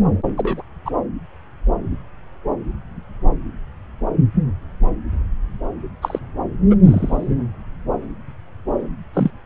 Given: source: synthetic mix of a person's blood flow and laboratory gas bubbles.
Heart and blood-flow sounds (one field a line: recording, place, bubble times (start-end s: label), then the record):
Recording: Doppler ultrasound of blood flow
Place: subclavian vein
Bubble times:
0.37-0.62 s: bubbles
0.85-0.91 s: bubbles
6.02-6.19 s: bubbles
6.70-6.75 s: bubbles
6.83-7.32 s: bubbles
9.13-9.30 s: bubbles
From the record:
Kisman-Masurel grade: 123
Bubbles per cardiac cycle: 1 to 2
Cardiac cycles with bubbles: 10 to 50%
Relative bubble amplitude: loud (0.450 to 0.775)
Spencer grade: 2 (many but less than half of the cardiac periods contain bubble signals, singularly or in groups)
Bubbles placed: anywhere in the cardiac cycle